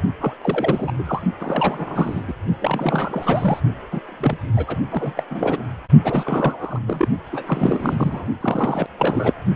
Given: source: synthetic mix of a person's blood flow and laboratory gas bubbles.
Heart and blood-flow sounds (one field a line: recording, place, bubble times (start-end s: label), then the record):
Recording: Doppler ultrasound of blood flow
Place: precordium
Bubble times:
0.20-0.34 s: bubbles
0.42-0.91 s: bubbles
0.98-1.03 s: bubbles
1.06-1.22 s: bubbles
1.40-2.23 s: bubbles
2.27-2.33 s: bubbles
2.60-3.60 s: bubbles
3.92-4.01 s: bubbles
4.08-4.37 s: bubbles
4.56-4.81 s: bubbles
4.91-5.13 s: bubbles
5.17-5.23 s: bubbles
5.29-5.64 s: bubbles
6.04-6.79 s: bubbles
6.88-7.08 s: bubbles
7.33-8.27 s: bubbles
8.41-8.86 s: bubbles
8.98-9.34 s: bubbles
From the record:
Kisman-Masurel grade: 342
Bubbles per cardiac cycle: rolling drumbeat, 9 or more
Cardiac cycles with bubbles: 100%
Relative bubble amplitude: moderate (0.250 to 0.450)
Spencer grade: 3 (all of the cardiac periods contain showers or single bubble signals, but not dominating or overriding the cardiac motion signals)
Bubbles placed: only in the low amplitude regions of the cardiac cycle